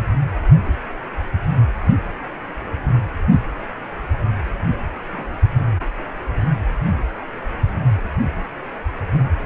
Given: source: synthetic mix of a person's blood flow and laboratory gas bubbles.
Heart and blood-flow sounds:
Doppler ultrasound of blood flow; precordium
5.12-5.36 s: bubbles
From the record:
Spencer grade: 1 (occasional bubble signal discernible with the cardiac motion signal, with majority of cardiac periods free of bubbles); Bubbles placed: anywhere in the cardiac cycle

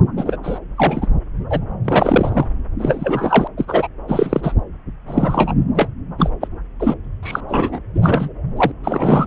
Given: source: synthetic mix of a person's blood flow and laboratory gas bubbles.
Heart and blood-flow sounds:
Doppler ultrasound of blood flow; subclavian vein
0.17-0.37 s: bubbles
0.43-0.59 s: bubbles
0.77-1.08 s: bubbles
1.49-1.60 s: bubbles
1.85-2.46 s: bubbles
2.79-3.48 s: bubbles
3.57-3.88 s: bubbles
4.08-4.53 s: bubbles
5.07-5.54 s: bubbles
5.75-5.88 s: bubbles
6.18-6.30 s: bubbles
6.40-6.47 s: bubbles
6.79-6.94 s: bubbles
7.22-7.40 s: bubbles
7.48-7.79 s: bubbles
7.94-8.29 s: bubbles
8.56-8.71 s: bubbles
8.83-9.26 s: bubbles
From the record:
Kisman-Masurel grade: 343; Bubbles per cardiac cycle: rolling drumbeat, 9 or more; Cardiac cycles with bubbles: 100%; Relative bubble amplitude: loud (0.450 to 0.775); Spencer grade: 3 (all of the cardiac periods contain showers or single bubble signals, but not dominating or overriding the cardiac motion signals); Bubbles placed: anywhere in the cardiac cycle

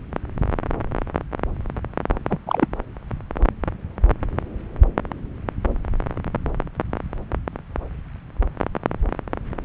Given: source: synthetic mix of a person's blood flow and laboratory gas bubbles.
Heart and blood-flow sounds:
Doppler ultrasound of blood flow; subclavian vein
2.30-2.37 s: bubbles
2.46-2.67 s: bubbles
From the record:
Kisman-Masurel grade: 122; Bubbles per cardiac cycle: 1 to 2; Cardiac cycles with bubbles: 10 to 50%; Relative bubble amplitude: moderate (0.250 to 0.450); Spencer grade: 2 (many but less than half of the cardiac periods contain bubble signals, singularly or in groups); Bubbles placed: anywhere in the cardiac cycle

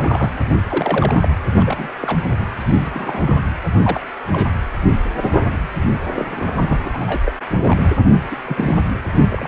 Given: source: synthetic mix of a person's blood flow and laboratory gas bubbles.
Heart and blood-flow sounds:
Doppler ultrasound of blood flow; precordium
0.00-0.31 s: bubbles
0.69-1.28 s: bubbles
1.59-1.89 s: bubbles
2.00-2.29 s: bubbles
2.31-2.36 s: bubbles
2.59-3.40 s: bubbles
3.82-4.01 s: bubbles
4.32-4.50 s: bubbles
5.21-5.49 s: bubbles
5.52-5.58 s: bubbles
6.16-6.26 s: bubbles
6.29-6.79 s: bubbles
6.85-6.88 s: bubbles
6.94-7.22 s: bubbles
7.26-7.33 s: bubbles
7.56-7.86 s: bubbles
8.30-8.37 s: bubbles
8.46-8.76 s: bubbles
9.15-9.25 s: bubbles
9.29-9.48 s: bubbles
From the record:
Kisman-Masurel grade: 242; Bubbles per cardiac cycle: several, 3 to 8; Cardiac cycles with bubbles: 100%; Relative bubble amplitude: moderate (0.250 to 0.450); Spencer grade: 3 (all of the cardiac periods contain showers or single bubble signals, but not dominating or overriding the cardiac motion signals); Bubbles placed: anywhere in the cardiac cycle

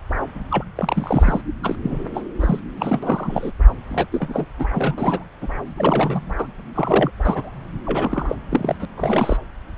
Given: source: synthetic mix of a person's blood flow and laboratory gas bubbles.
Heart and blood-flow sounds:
Doppler ultrasound of blood flow; subclavian vein
0.51-0.64 s: bubbles
0.75-1.42 s: bubbles
1.63-1.76 s: bubbles
1.83-2.01 s: bubbles
2.14-2.23 s: bubbles
2.40-2.60 s: bubbles
2.75-3.52 s: bubbles
3.88-4.07 s: bubbles
4.12-4.46 s: bubbles
4.59-4.65 s: bubbles
4.74-4.95 s: bubbles
4.97-5.24 s: bubbles
5.41-5.48 s: bubbles
5.78-6.34 s: bubbles
6.38-6.46 s: bubbles
6.75-7.10 s: bubbles
7.20-7.51 s: bubbles
7.86-8.36 s: bubbles
8.49-8.76 s: bubbles
8.79-8.86 s: bubbles
8.97-9.38 s: bubbles
9.74-9.78 s: bubbles
From the record:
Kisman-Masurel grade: 342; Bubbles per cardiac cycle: rolling drumbeat, 9 or more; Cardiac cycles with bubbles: 100%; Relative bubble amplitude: moderate (0.250 to 0.450); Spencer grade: 3 (all of the cardiac periods contain showers or single bubble signals, but not dominating or overriding the cardiac motion signals); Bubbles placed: anywhere in the cardiac cycle

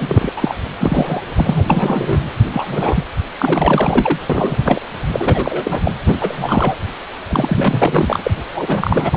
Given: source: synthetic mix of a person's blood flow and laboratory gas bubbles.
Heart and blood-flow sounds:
Doppler ultrasound of blood flow; precordium
0.00-0.32 s: bubbles
0.35-0.54 s: bubbles
0.78-1.21 s: bubbles
1.35-1.65 s: bubbles
1.69-2.23 s: bubbles
2.51-3.07 s: bubbles
3.39-4.19 s: bubbles
4.29-4.81 s: bubbles
5.12-5.94 s: bubbles
6.06-6.18 s: bubbles
6.21-6.76 s: bubbles
7.29-8.20 s: bubbles
8.23-8.31 s: bubbles
8.54-9.17 s: bubbles
From the record:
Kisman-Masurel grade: 343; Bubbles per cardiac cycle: rolling drumbeat, 9 or more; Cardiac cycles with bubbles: 100%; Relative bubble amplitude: loud (0.450 to 0.775); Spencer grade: 3 (all of the cardiac periods contain showers or single bubble signals, but not dominating or overriding the cardiac motion signals); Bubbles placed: anywhere in the cardiac cycle

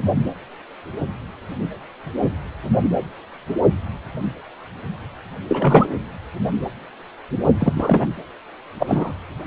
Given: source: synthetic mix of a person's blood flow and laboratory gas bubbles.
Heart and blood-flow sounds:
Doppler ultrasound of blood flow; precordium
5.49-5.88 s: bubbles
7.60-7.73 s: bubbles
7.75-8.07 s: bubbles
8.79-9.12 s: bubbles
From the record:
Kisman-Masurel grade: 213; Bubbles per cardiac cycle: several, 3 to 8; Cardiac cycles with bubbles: 1 to 10%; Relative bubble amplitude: loud (0.450 to 0.775); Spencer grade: 1 (occasional bubble signal discernible with the cardiac motion signal, with majority of cardiac periods free of bubbles); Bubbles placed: anywhere in the cardiac cycle

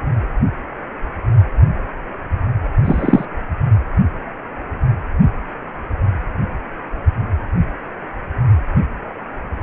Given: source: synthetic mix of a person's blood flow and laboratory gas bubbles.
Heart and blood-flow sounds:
Doppler ultrasound of blood flow; precordium
2.84-3.25 s: bubbles
From the record:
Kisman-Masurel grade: 113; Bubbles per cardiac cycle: 1 to 2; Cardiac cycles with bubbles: 1 to 10%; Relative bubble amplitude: loud (0.450 to 0.775); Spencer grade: 1 (occasional bubble signal discernible with the cardiac motion signal, with majority of cardiac periods free of bubbles); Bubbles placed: anywhere in the cardiac cycle

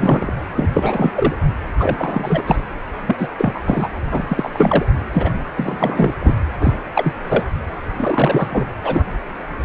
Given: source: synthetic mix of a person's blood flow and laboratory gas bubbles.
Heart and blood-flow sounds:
Doppler ultrasound of blood flow; precordium
0.00-0.33 s: bubbles
0.54-0.68 s: bubbles
0.73-1.12 s: bubbles
1.15-1.36 s: bubbles
1.80-2.42 s: bubbles
2.46-2.59 s: bubbles
3.05-3.29 s: bubbles
3.38-3.59 s: bubbles
3.65-3.88 s: bubbles
4.11-4.49 s: bubbles
4.54-4.86 s: bubbles
5.12-5.32 s: bubbles
5.57-6.14 s: bubbles
6.20-6.32 s: bubbles
6.59-6.77 s: bubbles
6.95-7.14 s: bubbles
7.29-7.45 s: bubbles
7.96-8.47 s: bubbles
8.51-8.67 s: bubbles
8.84-9.04 s: bubbles
From the record:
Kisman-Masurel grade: 343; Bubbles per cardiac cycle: rolling drumbeat, 9 or more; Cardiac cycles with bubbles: 100%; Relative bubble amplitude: loud (0.450 to 0.775); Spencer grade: 3 (all of the cardiac periods contain showers or single bubble signals, but not dominating or overriding the cardiac motion signals); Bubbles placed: anywhere in the cardiac cycle

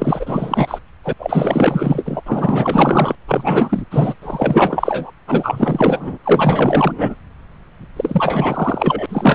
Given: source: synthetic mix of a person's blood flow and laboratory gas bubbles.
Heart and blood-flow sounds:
Doppler ultrasound of blood flow; subclavian vein
0.00-0.79 s: bubbles
1.04-1.13 s: bubbles
1.19-2.21 s: bubbles
2.26-3.15 s: bubbles
3.27-3.82 s: bubbles
3.90-4.14 s: bubbles
4.22-5.11 s: bubbles
5.27-6.18 s: bubbles
6.23-7.15 s: bubbles
7.96-9.06 s: bubbles
9.09-9.35 s: bubbles
From the record:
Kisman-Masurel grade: 444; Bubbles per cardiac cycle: continuous sound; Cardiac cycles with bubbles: 100%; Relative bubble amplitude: maximal (0.775 to 0.999); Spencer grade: 4 (maximum detectable bubble signal sounding continuously throughout systole and diastole of every cardiac period, and overriding the amplitude of the normal cardiac signals); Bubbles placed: anywhere in the cardiac cycle

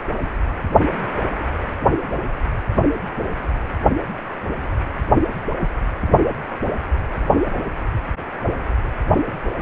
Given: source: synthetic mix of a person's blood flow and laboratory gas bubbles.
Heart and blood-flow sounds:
Doppler ultrasound of blood flow; precordium
5.59-5.69 s: bubbles
From the record:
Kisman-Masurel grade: 121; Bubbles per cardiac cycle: 1 to 2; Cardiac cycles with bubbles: 10 to 50%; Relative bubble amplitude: barely perceptible (0.100 to 0.250); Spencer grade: 2 (many but less than half of the cardiac periods contain bubble signals, singularly or in groups); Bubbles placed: only in the low amplitude regions of the cardiac cycle

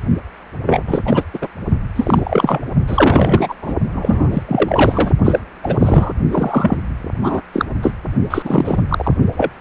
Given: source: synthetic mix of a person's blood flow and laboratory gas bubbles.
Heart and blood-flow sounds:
Doppler ultrasound of blood flow; precordium
0.66-0.84 s: bubbles
0.86-1.02 s: bubbles
1.05-1.24 s: bubbles
1.33-1.39 s: bubbles
1.42-1.49 s: bubbles
1.95-2.61 s: bubbles
2.87-3.54 s: bubbles
3.61-3.76 s: bubbles
3.93-4.42 s: bubbles
4.48-5.12 s: bubbles
5.25-5.39 s: bubbles
5.63-6.13 s: bubbles
6.31-6.78 s: bubbles
7.21-7.42 s: bubbles
7.53-7.65 s: bubbles
7.82-7.93 s: bubbles
8.30-8.81 s: bubbles
8.89-9.14 s: bubbles
9.37-9.51 s: bubbles
From the record:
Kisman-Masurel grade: 343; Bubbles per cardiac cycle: rolling drumbeat, 9 or more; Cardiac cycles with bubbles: 100%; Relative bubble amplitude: loud (0.450 to 0.775); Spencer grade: 3 (all of the cardiac periods contain showers or single bubble signals, but not dominating or overriding the cardiac motion signals); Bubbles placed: only in the low amplitude regions of the cardiac cycle

